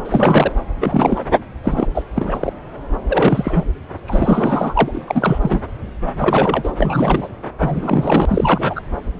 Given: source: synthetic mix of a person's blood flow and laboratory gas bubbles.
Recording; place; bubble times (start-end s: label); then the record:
Doppler ultrasound of blood flow; subclavian vein
0.04-0.54 s: bubbles
0.81-1.23 s: bubbles
1.63-1.88 s: bubbles
1.94-2.02 s: bubbles
2.15-2.52 s: bubbles
3.08-3.66 s: bubbles
4.07-5.62 s: bubbles
6.18-6.72 s: bubbles
6.77-7.33 s: bubbles
7.58-8.26 s: bubbles
8.28-8.82 s: bubbles
From the record:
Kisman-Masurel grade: 333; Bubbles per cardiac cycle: rolling drumbeat, 9 or more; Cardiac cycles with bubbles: 50 to 99%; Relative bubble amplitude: loud (0.450 to 0.775); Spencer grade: 3 (all of the cardiac periods contain showers or single bubble signals, but not dominating or overriding the cardiac motion signals); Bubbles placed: anywhere in the cardiac cycle